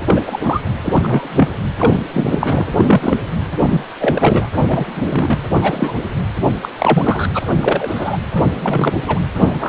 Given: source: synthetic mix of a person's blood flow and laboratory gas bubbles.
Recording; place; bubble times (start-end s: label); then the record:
Doppler ultrasound of blood flow; precordium
0.06-0.21 s: bubbles
0.26-0.40 s: bubbles
0.43-0.60 s: bubbles
0.84-1.49 s: bubbles
1.78-2.04 s: bubbles
2.13-2.67 s: bubbles
2.69-3.17 s: bubbles
3.58-3.84 s: bubbles
4.00-4.46 s: bubbles
4.67-4.86 s: bubbles
4.95-5.37 s: bubbles
5.54-5.97 s: bubbles
6.62-6.71 s: bubbles
6.79-7.29 s: bubbles
7.33-7.39 s: bubbles
7.59-8.18 s: bubbles
8.34-8.50 s: bubbles
8.54-9.03 s: bubbles
9.06-9.20 s: bubbles
9.38-9.69 s: bubbles
From the record:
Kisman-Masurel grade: 243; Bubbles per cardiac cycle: several, 3 to 8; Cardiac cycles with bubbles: 100%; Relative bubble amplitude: loud (0.450 to 0.775); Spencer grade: 3 (all of the cardiac periods contain showers or single bubble signals, but not dominating or overriding the cardiac motion signals); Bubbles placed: anywhere in the cardiac cycle